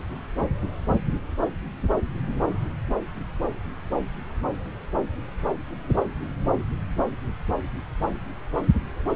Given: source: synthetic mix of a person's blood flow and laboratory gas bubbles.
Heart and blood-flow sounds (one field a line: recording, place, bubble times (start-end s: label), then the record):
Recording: Doppler ultrasound of blood flow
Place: subclavian vein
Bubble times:
no bubbles
From the record:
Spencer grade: 0 (complete lack of bubble signals)